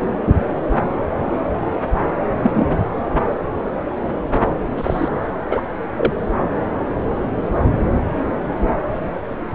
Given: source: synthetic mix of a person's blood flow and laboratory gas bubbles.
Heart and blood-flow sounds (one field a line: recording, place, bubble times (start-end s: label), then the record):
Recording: Doppler ultrasound of blood flow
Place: subclavian vein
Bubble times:
2.43-2.50 s: bubbles
2.54-2.69 s: bubbles
4.78-5.08 s: bubbles
5.50-5.61 s: bubbles
5.97-6.12 s: bubbles
From the record:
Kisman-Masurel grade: 123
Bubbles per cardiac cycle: 1 to 2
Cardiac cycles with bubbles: 10 to 50%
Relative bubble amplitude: loud (0.450 to 0.775)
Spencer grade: 2 (many but less than half of the cardiac periods contain bubble signals, singularly or in groups)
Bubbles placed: anywhere in the cardiac cycle